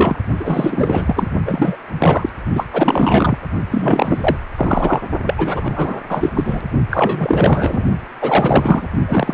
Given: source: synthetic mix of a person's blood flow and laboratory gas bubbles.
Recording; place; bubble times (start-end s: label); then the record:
Doppler ultrasound of blood flow; precordium
0.00-0.16 s: bubbles
0.39-1.28 s: bubbles
1.45-1.77 s: bubbles
2.00-2.29 s: bubbles
2.55-2.66 s: bubbles
2.73-3.38 s: bubbles
3.71-4.37 s: bubbles
4.55-5.00 s: bubbles
5.25-5.34 s: bubbles
5.38-6.00 s: bubbles
6.09-6.29 s: bubbles
6.35-6.59 s: bubbles
6.91-7.84 s: bubbles
8.21-8.87 s: bubbles
9.07-9.34 s: bubbles
From the record:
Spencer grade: 4 (maximum detectable bubble signal sounding continuously throughout systole and diastole of every cardiac period, and overriding the amplitude of the normal cardiac signals); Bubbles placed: only in the low amplitude regions of the cardiac cycle